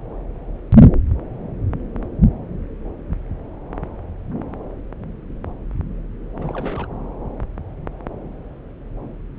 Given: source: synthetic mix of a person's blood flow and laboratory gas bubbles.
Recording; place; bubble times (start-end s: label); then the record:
Doppler ultrasound of blood flow; subclavian vein
6.39-6.87 s: bubbles
From the record:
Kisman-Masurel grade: 211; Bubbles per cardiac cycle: several, 3 to 8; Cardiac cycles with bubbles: 1 to 10%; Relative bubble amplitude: barely perceptible (0.100 to 0.250); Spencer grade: 1 (occasional bubble signal discernible with the cardiac motion signal, with majority of cardiac periods free of bubbles); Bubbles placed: anywhere in the cardiac cycle